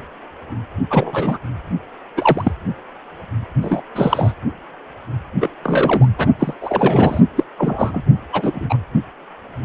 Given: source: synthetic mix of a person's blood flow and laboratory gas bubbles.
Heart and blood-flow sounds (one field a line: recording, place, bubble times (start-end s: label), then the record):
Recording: Doppler ultrasound of blood flow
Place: precordium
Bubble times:
0.90-1.38 s: bubbles
2.17-2.52 s: bubbles
3.62-3.81 s: bubbles
3.95-4.32 s: bubbles
5.40-5.49 s: bubbles
5.63-6.08 s: bubbles
6.19-6.27 s: bubbles
6.38-6.54 s: bubbles
6.61-7.21 s: bubbles
7.36-7.44 s: bubbles
7.58-8.02 s: bubbles
8.33-8.78 s: bubbles
From the record:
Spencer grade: 2 (many but less than half of the cardiac periods contain bubble signals, singularly or in groups)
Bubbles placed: only in the low amplitude regions of the cardiac cycle